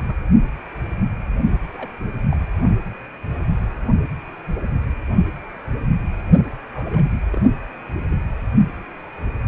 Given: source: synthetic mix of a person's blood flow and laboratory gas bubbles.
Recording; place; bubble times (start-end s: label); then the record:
Doppler ultrasound of blood flow; precordium
0.00-0.23 s: bubbles
1.73-1.89 s: bubbles
2.31-2.36 s: bubbles
6.73-7.12 s: bubbles
7.30-7.46 s: bubbles
8.11-8.17 s: bubbles
From the record:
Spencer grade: 2 (many but less than half of the cardiac periods contain bubble signals, singularly or in groups); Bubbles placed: only in the low amplitude regions of the cardiac cycle